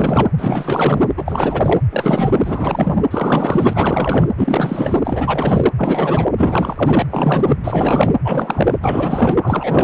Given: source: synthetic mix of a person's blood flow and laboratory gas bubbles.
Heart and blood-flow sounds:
Doppler ultrasound of blood flow; precordium
0.00-0.28 s: bubbles
0.37-1.03 s: bubbles
1.17-1.80 s: bubbles
1.91-3.02 s: bubbles
3.10-4.28 s: bubbles
4.37-4.99 s: bubbles
5.04-5.69 s: bubbles
5.77-6.28 s: bubbles
6.37-7.06 s: bubbles
7.10-7.58 s: bubbles
7.63-8.14 s: bubbles
8.23-8.74 s: bubbles
8.81-9.37 s: bubbles
9.43-9.83 s: bubbles
From the record:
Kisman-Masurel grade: 444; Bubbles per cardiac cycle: continuous sound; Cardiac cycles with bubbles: 100%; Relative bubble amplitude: maximal (0.775 to 0.999); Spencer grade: 4 (maximum detectable bubble signal sounding continuously throughout systole and diastole of every cardiac period, and overriding the amplitude of the normal cardiac signals); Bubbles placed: anywhere in the cardiac cycle

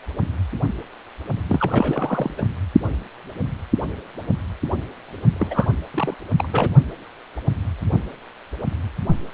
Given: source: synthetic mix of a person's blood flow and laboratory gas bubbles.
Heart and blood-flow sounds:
Doppler ultrasound of blood flow; precordium
1.49-2.34 s: bubbles
2.38-2.42 s: bubbles
5.33-5.72 s: bubbles
5.94-6.14 s: bubbles
6.38-6.49 s: bubbles
6.52-6.69 s: bubbles
From the record:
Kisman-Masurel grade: 332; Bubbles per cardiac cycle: rolling drumbeat, 9 or more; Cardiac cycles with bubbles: 50 to 99%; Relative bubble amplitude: moderate (0.250 to 0.450); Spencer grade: 3 (all of the cardiac periods contain showers or single bubble signals, but not dominating or overriding the cardiac motion signals); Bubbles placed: only in the low amplitude regions of the cardiac cycle

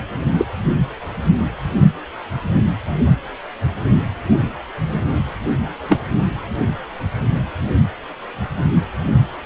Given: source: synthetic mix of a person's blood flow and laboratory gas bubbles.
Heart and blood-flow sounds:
Doppler ultrasound of blood flow; precordium
0.38-0.47 s: bubbles
5.88-6.02 s: bubbles
From the record:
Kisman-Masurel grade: 123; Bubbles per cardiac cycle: 1 to 2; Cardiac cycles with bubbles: 10 to 50%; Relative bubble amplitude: loud (0.450 to 0.775); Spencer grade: 2 (many but less than half of the cardiac periods contain bubble signals, singularly or in groups); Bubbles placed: only in the low amplitude regions of the cardiac cycle

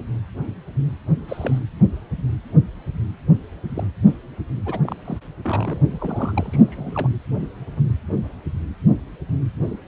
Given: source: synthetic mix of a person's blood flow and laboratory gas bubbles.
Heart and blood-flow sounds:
Doppler ultrasound of blood flow; precordium
1.28-1.58 s: bubbles
3.69-3.86 s: bubbles
4.05-4.17 s: bubbles
4.65-4.79 s: bubbles
4.83-4.96 s: bubbles
5.04-5.18 s: bubbles
5.42-5.79 s: bubbles
5.91-7.08 s: bubbles
From the record:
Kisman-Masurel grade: 221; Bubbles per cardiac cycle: several, 3 to 8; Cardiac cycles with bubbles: 10 to 50%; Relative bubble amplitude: barely perceptible (0.100 to 0.250); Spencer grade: 2 (many but less than half of the cardiac periods contain bubble signals, singularly or in groups); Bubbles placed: anywhere in the cardiac cycle

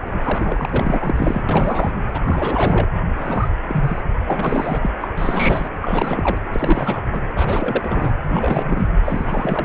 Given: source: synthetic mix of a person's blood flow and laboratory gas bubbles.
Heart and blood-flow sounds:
Doppler ultrasound of blood flow; precordium
0.00-0.21 s: bubbles
0.24-1.43 s: bubbles
1.48-1.92 s: bubbles
2.14-2.87 s: bubbles
3.17-3.48 s: bubbles
3.67-4.03 s: bubbles
4.21-4.24 s: bubbles
4.26-4.92 s: bubbles
5.01-5.08 s: bubbles
5.17-5.69 s: bubbles
5.82-6.38 s: bubbles
6.52-7.02 s: bubbles
7.12-7.20 s: bubbles
7.36-8.14 s: bubbles
8.29-8.88 s: bubbles
9.04-9.65 s: bubbles
From the record:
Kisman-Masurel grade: 332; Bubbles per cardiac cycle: rolling drumbeat, 9 or more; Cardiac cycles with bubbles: 50 to 99%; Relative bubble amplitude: moderate (0.250 to 0.450); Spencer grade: 3 (all of the cardiac periods contain showers or single bubble signals, but not dominating or overriding the cardiac motion signals); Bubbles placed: anywhere in the cardiac cycle

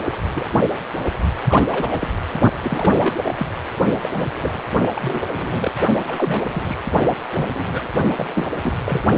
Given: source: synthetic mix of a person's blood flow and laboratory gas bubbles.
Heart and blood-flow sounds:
Doppler ultrasound of blood flow; precordium
0.34-0.46 s: bubbles
0.63-0.68 s: bubbles
1.48-1.67 s: bubbles
1.72-2.08 s: bubbles
2.63-3.16 s: bubbles
3.25-3.35 s: bubbles
3.38-3.46 s: bubbles
4.00-4.62 s: bubbles
4.95-5.21 s: bubbles
5.32-5.71 s: bubbles
6.07-6.78 s: bubbles
7.32-7.89 s: bubbles
8.15-8.49 s: bubbles
8.62-8.72 s: bubbles
8.86-9.01 s: bubbles
From the record:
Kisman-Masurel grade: 242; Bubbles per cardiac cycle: several, 3 to 8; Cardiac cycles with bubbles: 100%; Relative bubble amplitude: moderate (0.250 to 0.450); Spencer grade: 3 (all of the cardiac periods contain showers or single bubble signals, but not dominating or overriding the cardiac motion signals); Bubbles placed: only in the low amplitude regions of the cardiac cycle

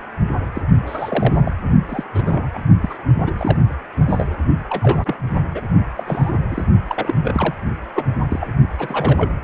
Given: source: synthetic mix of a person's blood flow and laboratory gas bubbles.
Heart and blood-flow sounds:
Doppler ultrasound of blood flow; precordium
0.55-0.61 s: bubbles
0.86-1.56 s: bubbles
1.88-2.04 s: bubbles
2.14-2.48 s: bubbles
2.53-2.59 s: bubbles
2.80-2.97 s: bubbles
3.26-3.31 s: bubbles
3.38-3.57 s: bubbles
4.09-4.38 s: bubbles
4.69-5.17 s: bubbles
5.54-5.61 s: bubbles
5.96-6.33 s: bubbles
6.50-6.64 s: bubbles
6.88-7.14 s: bubbles
7.22-7.54 s: bubbles
7.93-8.04 s: bubbles
8.29-8.48 s: bubbles
8.79-9.36 s: bubbles
From the record:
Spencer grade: 3 (all of the cardiac periods contain showers or single bubble signals, but not dominating or overriding the cardiac motion signals); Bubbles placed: only in the low amplitude regions of the cardiac cycle

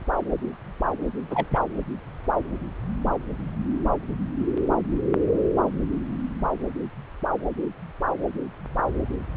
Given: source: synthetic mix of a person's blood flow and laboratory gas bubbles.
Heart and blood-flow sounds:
Doppler ultrasound of blood flow; subclavian vein
1.30-1.47 s: bubbles
1.51-1.59 s: bubbles
From the record:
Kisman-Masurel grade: 222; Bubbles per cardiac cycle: several, 3 to 8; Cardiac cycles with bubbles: 10 to 50%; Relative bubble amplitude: moderate (0.250 to 0.450); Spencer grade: 2 (many but less than half of the cardiac periods contain bubble signals, singularly or in groups); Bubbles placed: anywhere in the cardiac cycle

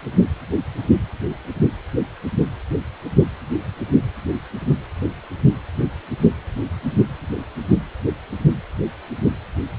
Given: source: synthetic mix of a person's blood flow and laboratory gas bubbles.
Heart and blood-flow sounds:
Doppler ultrasound of blood flow; precordium
no bubbles
From the record:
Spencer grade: 0 (complete lack of bubble signals)

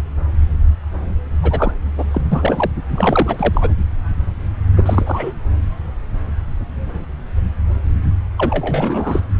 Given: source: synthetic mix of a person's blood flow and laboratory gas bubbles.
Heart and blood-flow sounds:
Doppler ultrasound of blood flow; subclavian vein
1.42-1.72 s: bubbles
1.98-2.04 s: bubbles
2.11-2.21 s: bubbles
2.31-2.71 s: bubbles
2.94-3.74 s: bubbles
4.76-5.32 s: bubbles
8.38-9.20 s: bubbles
From the record:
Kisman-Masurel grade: 223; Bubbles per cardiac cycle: several, 3 to 8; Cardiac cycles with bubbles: 10 to 50%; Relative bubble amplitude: loud (0.450 to 0.775); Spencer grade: 2 (many but less than half of the cardiac periods contain bubble signals, singularly or in groups); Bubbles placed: anywhere in the cardiac cycle

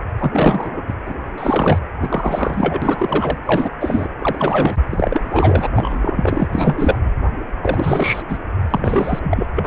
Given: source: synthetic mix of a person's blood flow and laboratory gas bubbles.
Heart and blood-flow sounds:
Doppler ultrasound of blood flow; precordium
0.18-0.82 s: bubbles
0.88-0.94 s: bubbles
1.06-1.15 s: bubbles
1.38-1.79 s: bubbles
2.01-3.38 s: bubbles
3.46-3.69 s: bubbles
3.79-4.08 s: bubbles
4.20-4.75 s: bubbles
4.89-5.69 s: bubbles
5.74-6.48 s: bubbles
6.50-6.97 s: bubbles
7.62-8.22 s: bubbles
8.29-8.38 s: bubbles
8.70-9.46 s: bubbles
9.56-9.67 s: bubbles
From the record:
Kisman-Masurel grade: 343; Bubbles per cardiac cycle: rolling drumbeat, 9 or more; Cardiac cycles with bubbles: 100%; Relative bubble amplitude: loud (0.450 to 0.775); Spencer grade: 3 (all of the cardiac periods contain showers or single bubble signals, but not dominating or overriding the cardiac motion signals); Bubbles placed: anywhere in the cardiac cycle

